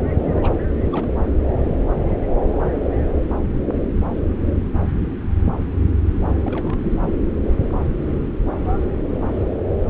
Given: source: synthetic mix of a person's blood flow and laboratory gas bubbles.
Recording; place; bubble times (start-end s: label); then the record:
Doppler ultrasound of blood flow; subclavian vein
0.22-0.53 s: bubbles
0.70-0.79 s: bubbles
0.82-1.07 s: bubbles
6.06-6.11 s: bubbles
6.44-7.15 s: bubbles
9.13-9.20 s: bubbles
9.88-9.90 s: bubbles
From the record:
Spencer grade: 2 (many but less than half of the cardiac periods contain bubble signals, singularly or in groups); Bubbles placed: anywhere in the cardiac cycle